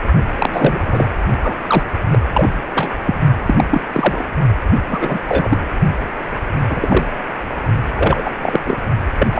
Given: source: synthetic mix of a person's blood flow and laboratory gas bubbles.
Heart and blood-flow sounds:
Doppler ultrasound of blood flow; precordium
0.38-0.79 s: bubbles
0.86-1.11 s: bubbles
1.44-1.54 s: bubbles
1.67-1.85 s: bubbles
2.12-2.19 s: bubbles
2.33-2.50 s: bubbles
2.75-2.90 s: bubbles
3.04-3.19 s: bubbles
3.46-3.64 s: bubbles
3.71-3.82 s: bubbles
3.91-4.28 s: bubbles
4.89-5.19 s: bubbles
5.28-5.58 s: bubbles
6.70-7.05 s: bubbles
7.94-8.30 s: bubbles
8.41-8.59 s: bubbles
8.65-8.76 s: bubbles
9.19-9.27 s: bubbles
9.31-9.40 s: bubbles
From the record:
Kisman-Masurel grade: 243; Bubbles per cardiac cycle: several, 3 to 8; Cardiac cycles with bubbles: 100%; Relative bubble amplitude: loud (0.450 to 0.775); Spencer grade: 3 (all of the cardiac periods contain showers or single bubble signals, but not dominating or overriding the cardiac motion signals); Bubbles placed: only in the low amplitude regions of the cardiac cycle

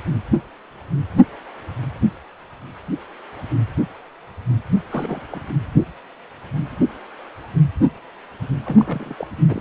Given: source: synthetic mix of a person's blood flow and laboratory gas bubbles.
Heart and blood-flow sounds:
Doppler ultrasound of blood flow; precordium
4.91-5.22 s: bubbles
5.31-5.40 s: bubbles
8.63-9.14 s: bubbles
9.17-9.27 s: bubbles
9.48-9.61 s: bubbles
From the record:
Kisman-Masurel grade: 221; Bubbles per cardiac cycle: several, 3 to 8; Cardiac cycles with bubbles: 10 to 50%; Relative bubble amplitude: barely perceptible (0.100 to 0.250); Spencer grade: 2 (many but less than half of the cardiac periods contain bubble signals, singularly or in groups); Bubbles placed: anywhere in the cardiac cycle

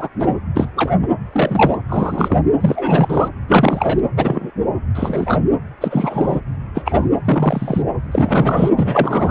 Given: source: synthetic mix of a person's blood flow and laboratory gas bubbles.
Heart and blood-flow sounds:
Doppler ultrasound of blood flow; precordium
0.00-0.08 s: bubbles
0.19-0.34 s: bubbles
0.54-0.70 s: bubbles
0.77-0.91 s: bubbles
1.02-1.08 s: bubbles
1.32-1.78 s: bubbles
1.89-2.38 s: bubbles
2.60-3.29 s: bubbles
3.48-4.01 s: bubbles
4.17-4.50 s: bubbles
4.95-5.43 s: bubbles
5.81-6.40 s: bubbles
6.74-6.82 s: bubbles
6.84-7.07 s: bubbles
7.24-7.82 s: bubbles
8.11-8.70 s: bubbles
8.75-9.31 s: bubbles
From the record:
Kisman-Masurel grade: 243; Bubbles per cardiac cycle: several, 3 to 8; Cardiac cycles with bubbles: 100%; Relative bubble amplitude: loud (0.450 to 0.775); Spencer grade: 3 (all of the cardiac periods contain showers or single bubble signals, but not dominating or overriding the cardiac motion signals); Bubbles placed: anywhere in the cardiac cycle

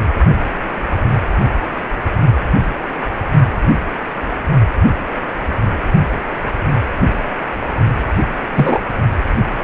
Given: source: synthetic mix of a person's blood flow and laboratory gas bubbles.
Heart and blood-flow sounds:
Doppler ultrasound of blood flow; precordium
8.55-8.79 s: bubbles
From the record:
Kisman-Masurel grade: 113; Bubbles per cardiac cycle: 1 to 2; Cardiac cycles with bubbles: 1 to 10%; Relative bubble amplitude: loud (0.450 to 0.775); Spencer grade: 1 (occasional bubble signal discernible with the cardiac motion signal, with majority of cardiac periods free of bubbles); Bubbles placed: only in the low amplitude regions of the cardiac cycle

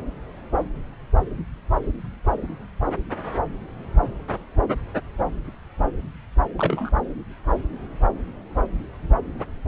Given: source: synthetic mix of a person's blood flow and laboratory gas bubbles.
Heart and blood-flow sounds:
Doppler ultrasound of blood flow; subclavian vein
6.57-6.90 s: bubbles
From the record:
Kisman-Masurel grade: 112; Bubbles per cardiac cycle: 1 to 2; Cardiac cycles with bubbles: 1 to 10%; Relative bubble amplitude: moderate (0.250 to 0.450); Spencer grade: 1 (occasional bubble signal discernible with the cardiac motion signal, with majority of cardiac periods free of bubbles); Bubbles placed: anywhere in the cardiac cycle

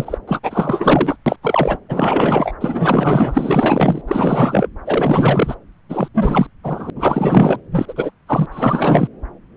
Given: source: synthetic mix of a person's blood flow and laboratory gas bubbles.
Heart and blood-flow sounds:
Doppler ultrasound of blood flow; subclavian vein
0.00-0.18 s: bubbles
0.27-0.39 s: bubbles
0.43-1.16 s: bubbles
1.26-1.36 s: bubbles
1.42-1.78 s: bubbles
1.88-2.54 s: bubbles
2.60-4.02 s: bubbles
4.08-4.67 s: bubbles
4.86-5.55 s: bubbles
5.89-6.08 s: bubbles
6.13-6.46 s: bubbles
6.63-6.90 s: bubbles
6.95-7.60 s: bubbles
7.71-7.86 s: bubbles
7.88-7.94 s: bubbles
7.96-8.11 s: bubbles
8.27-8.46 s: bubbles
8.51-9.07 s: bubbles
From the record:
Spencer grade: 4 (maximum detectable bubble signal sounding continuously throughout systole and diastole of every cardiac period, and overriding the amplitude of the normal cardiac signals); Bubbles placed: anywhere in the cardiac cycle

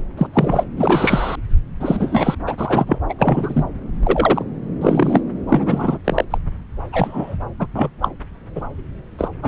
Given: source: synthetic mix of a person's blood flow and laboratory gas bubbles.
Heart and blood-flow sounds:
Doppler ultrasound of blood flow; subclavian vein
0.17-0.27 s: bubbles
0.33-0.68 s: bubbles
0.77-1.35 s: bubbles
1.79-2.35 s: bubbles
2.46-2.98 s: bubbles
3.09-3.14 s: bubbles
3.19-3.65 s: bubbles
4.03-4.45 s: bubbles
4.81-5.21 s: bubbles
5.49-5.98 s: bubbles
6.04-6.25 s: bubbles
6.30-6.38 s: bubbles
6.92-7.35 s: bubbles
7.59-7.67 s: bubbles
7.75-7.90 s: bubbles
8.02-8.09 s: bubbles
8.55-8.62 s: bubbles
9.18-9.31 s: bubbles
9.42-9.48 s: bubbles
From the record:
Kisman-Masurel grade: 243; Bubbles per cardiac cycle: several, 3 to 8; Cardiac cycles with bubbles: 100%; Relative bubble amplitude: loud (0.450 to 0.775); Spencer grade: 3 (all of the cardiac periods contain showers or single bubble signals, but not dominating or overriding the cardiac motion signals); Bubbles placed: anywhere in the cardiac cycle

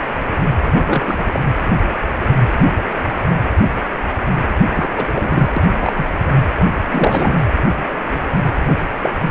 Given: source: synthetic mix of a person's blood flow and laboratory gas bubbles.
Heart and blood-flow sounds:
Doppler ultrasound of blood flow; precordium
0.76-0.80 s: bubbles
0.85-1.20 s: bubbles
1.33-1.42 s: bubbles
4.75-4.89 s: bubbles
4.96-5.54 s: bubbles
5.56-5.63 s: bubbles
5.79-5.93 s: bubbles
5.96-6.14 s: bubbles
6.90-7.38 s: bubbles
8.61-8.74 s: bubbles
9.03-9.11 s: bubbles
9.22-9.31 s: bubbles
From the record:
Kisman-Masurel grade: 222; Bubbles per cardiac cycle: several, 3 to 8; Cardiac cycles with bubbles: 10 to 50%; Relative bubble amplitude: moderate (0.250 to 0.450); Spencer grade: 2 (many but less than half of the cardiac periods contain bubble signals, singularly or in groups); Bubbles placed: anywhere in the cardiac cycle

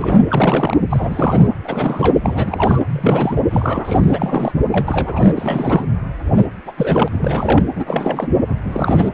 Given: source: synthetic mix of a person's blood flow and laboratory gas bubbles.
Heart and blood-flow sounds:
Doppler ultrasound of blood flow; precordium
0.00-0.25 s: bubbles
0.28-0.77 s: bubbles
0.90-1.49 s: bubbles
1.64-2.18 s: bubbles
2.23-2.81 s: bubbles
2.87-3.41 s: bubbles
3.50-4.52 s: bubbles
4.70-5.33 s: bubbles
5.37-5.84 s: bubbles
6.37-6.46 s: bubbles
6.66-6.71 s: bubbles
6.78-7.08 s: bubbles
7.11-7.63 s: bubbles
7.75-8.28 s: bubbles
8.46-8.55 s: bubbles
8.64-9.10 s: bubbles
From the record:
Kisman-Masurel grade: 342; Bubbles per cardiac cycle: rolling drumbeat, 9 or more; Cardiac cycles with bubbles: 100%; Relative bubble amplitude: moderate (0.250 to 0.450); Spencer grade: 3 (all of the cardiac periods contain showers or single bubble signals, but not dominating or overriding the cardiac motion signals); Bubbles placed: anywhere in the cardiac cycle

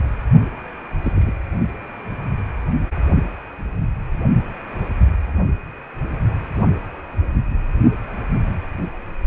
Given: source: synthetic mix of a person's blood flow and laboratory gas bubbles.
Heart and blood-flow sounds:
Doppler ultrasound of blood flow; precordium
1.02-1.12 s: bubbles
1.15-1.31 s: bubbles
From the record:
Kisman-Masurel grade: 121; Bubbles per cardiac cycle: 1 to 2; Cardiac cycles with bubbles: 10 to 50%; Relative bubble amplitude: barely perceptible (0.100 to 0.250); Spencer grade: 2 (many but less than half of the cardiac periods contain bubble signals, singularly or in groups); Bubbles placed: only in the low amplitude regions of the cardiac cycle

